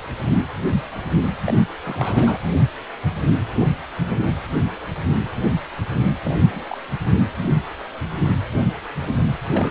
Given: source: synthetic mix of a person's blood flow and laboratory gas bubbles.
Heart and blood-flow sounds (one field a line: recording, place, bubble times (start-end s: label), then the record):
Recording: Doppler ultrasound of blood flow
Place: precordium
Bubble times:
1.45-1.53 s: bubbles
1.58-1.62 s: bubbles
1.84-2.38 s: bubbles
6.23-6.66 s: bubbles
6.69-6.77 s: bubbles
9.46-9.71 s: bubbles
From the record:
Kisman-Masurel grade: 221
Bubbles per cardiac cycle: several, 3 to 8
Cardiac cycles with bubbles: 10 to 50%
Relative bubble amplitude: barely perceptible (0.100 to 0.250)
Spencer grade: 2 (many but less than half of the cardiac periods contain bubble signals, singularly or in groups)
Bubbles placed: anywhere in the cardiac cycle